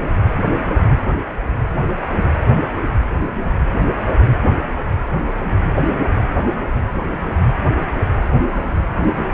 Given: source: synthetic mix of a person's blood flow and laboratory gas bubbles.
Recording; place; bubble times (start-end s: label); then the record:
Doppler ultrasound of blood flow; precordium
8.49-8.76 s: bubbles
From the record:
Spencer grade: 1 (occasional bubble signal discernible with the cardiac motion signal, with majority of cardiac periods free of bubbles); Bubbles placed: anywhere in the cardiac cycle